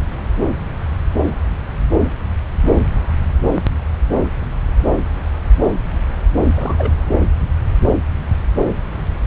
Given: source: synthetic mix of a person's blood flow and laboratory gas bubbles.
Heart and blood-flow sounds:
Doppler ultrasound of blood flow; subclavian vein
6.55-6.93 s: bubbles
From the record:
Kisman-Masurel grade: 212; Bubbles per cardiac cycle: several, 3 to 8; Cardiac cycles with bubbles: 1 to 10%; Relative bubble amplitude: moderate (0.250 to 0.450); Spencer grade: 1 (occasional bubble signal discernible with the cardiac motion signal, with majority of cardiac periods free of bubbles); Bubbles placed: anywhere in the cardiac cycle

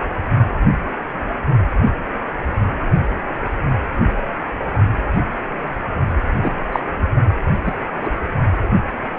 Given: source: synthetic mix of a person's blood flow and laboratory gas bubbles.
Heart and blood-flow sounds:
Doppler ultrasound of blood flow; precordium
6.42-6.52 s: bubbles
6.72-6.79 s: bubbles
7.65-7.75 s: bubbles
8.00-8.10 s: bubbles
From the record:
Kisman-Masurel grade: 123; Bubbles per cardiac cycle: 1 to 2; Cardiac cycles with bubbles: 10 to 50%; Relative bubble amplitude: loud (0.450 to 0.775); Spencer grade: 2 (many but less than half of the cardiac periods contain bubble signals, singularly or in groups); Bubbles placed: only in the low amplitude regions of the cardiac cycle

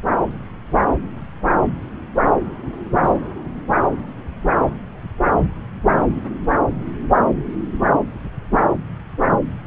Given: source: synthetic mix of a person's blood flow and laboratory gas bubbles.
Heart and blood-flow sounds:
Doppler ultrasound of blood flow; subclavian vein
3.03-3.19 s: bubbles
From the record:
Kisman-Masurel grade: 113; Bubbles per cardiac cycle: 1 to 2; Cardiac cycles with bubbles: 1 to 10%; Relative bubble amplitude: loud (0.450 to 0.775); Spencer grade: 1 (occasional bubble signal discernible with the cardiac motion signal, with majority of cardiac periods free of bubbles); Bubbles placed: anywhere in the cardiac cycle

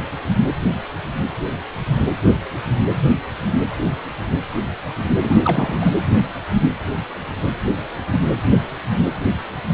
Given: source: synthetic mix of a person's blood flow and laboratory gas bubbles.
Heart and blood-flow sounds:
Doppler ultrasound of blood flow; precordium
5.23-5.38 s: bubbles
5.44-5.90 s: bubbles
From the record:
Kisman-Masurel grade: 212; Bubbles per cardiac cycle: several, 3 to 8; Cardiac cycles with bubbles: 1 to 10%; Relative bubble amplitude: moderate (0.250 to 0.450); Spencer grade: 1 (occasional bubble signal discernible with the cardiac motion signal, with majority of cardiac periods free of bubbles); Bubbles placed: anywhere in the cardiac cycle

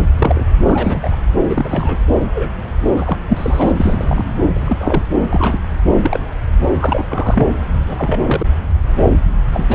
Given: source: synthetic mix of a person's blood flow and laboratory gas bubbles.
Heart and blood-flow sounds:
Doppler ultrasound of blood flow; subclavian vein
0.18-0.45 s: bubbles
0.65-1.17 s: bubbles
1.49-1.98 s: bubbles
2.34-2.50 s: bubbles
2.92-3.17 s: bubbles
3.27-3.72 s: bubbles
3.76-4.24 s: bubbles
4.50-5.03 s: bubbles
5.29-5.62 s: bubbles
6.02-6.21 s: bubbles
6.80-7.04 s: bubbles
7.08-7.47 s: bubbles
7.88-8.21 s: bubbles
8.26-8.47 s: bubbles
9.52-9.65 s: bubbles
9.68-9.75 s: bubbles
From the record:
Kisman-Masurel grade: 242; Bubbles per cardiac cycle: several, 3 to 8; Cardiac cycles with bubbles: 100%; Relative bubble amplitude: moderate (0.250 to 0.450); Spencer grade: 3 (all of the cardiac periods contain showers or single bubble signals, but not dominating or overriding the cardiac motion signals); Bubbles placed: anywhere in the cardiac cycle

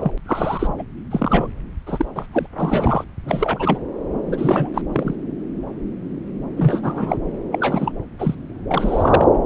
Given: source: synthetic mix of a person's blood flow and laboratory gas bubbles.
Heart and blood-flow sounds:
Doppler ultrasound of blood flow; subclavian vein
0.00-0.11 s: bubbles
0.26-0.73 s: bubbles
0.78-0.83 s: bubbles
1.11-1.48 s: bubbles
1.86-2.05 s: bubbles
2.15-2.26 s: bubbles
2.32-2.46 s: bubbles
2.58-3.04 s: bubbles
3.25-3.78 s: bubbles
4.29-4.81 s: bubbles
4.92-5.16 s: bubbles
6.56-7.17 s: bubbles
7.51-7.92 s: bubbles
8.19-8.35 s: bubbles
8.71-9.27 s: bubbles
From the record:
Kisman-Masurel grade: 332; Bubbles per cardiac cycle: rolling drumbeat, 9 or more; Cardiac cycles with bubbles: 50 to 99%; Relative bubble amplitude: moderate (0.250 to 0.450); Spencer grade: 3 (all of the cardiac periods contain showers or single bubble signals, but not dominating or overriding the cardiac motion signals); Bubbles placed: anywhere in the cardiac cycle

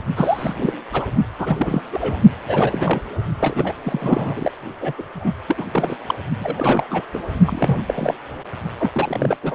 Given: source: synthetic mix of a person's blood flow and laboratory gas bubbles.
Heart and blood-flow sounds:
Doppler ultrasound of blood flow; precordium
0.17-0.73 s: bubbles
0.92-1.06 s: bubbles
1.39-1.81 s: bubbles
1.93-2.19 s: bubbles
2.48-3.00 s: bubbles
3.40-3.73 s: bubbles
3.83-4.52 s: bubbles
4.81-4.94 s: bubbles
4.98-5.02 s: bubbles
5.16-5.32 s: bubbles
5.48-5.65 s: bubbles
5.72-5.97 s: bubbles
6.07-6.15 s: bubbles
6.40-6.87 s: bubbles
6.91-7.02 s: bubbles
7.14-7.23 s: bubbles
7.46-7.83 s: bubbles
7.88-8.14 s: bubbles
8.79-8.91 s: bubbles
8.94-9.37 s: bubbles
9.43-9.55 s: bubbles
From the record:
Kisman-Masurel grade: 342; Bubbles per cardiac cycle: rolling drumbeat, 9 or more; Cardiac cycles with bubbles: 100%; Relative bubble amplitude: moderate (0.250 to 0.450); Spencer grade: 3 (all of the cardiac periods contain showers or single bubble signals, but not dominating or overriding the cardiac motion signals); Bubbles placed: only in the low amplitude regions of the cardiac cycle

